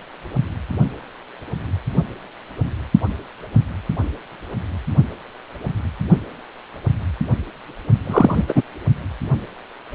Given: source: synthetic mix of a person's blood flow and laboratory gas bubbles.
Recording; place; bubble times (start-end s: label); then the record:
Doppler ultrasound of blood flow; precordium
8.06-8.44 s: bubbles
8.48-8.62 s: bubbles
From the record:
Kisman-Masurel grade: 213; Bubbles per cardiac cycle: several, 3 to 8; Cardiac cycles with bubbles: 1 to 10%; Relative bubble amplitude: loud (0.450 to 0.775); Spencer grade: 1 (occasional bubble signal discernible with the cardiac motion signal, with majority of cardiac periods free of bubbles); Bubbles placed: only in the low amplitude regions of the cardiac cycle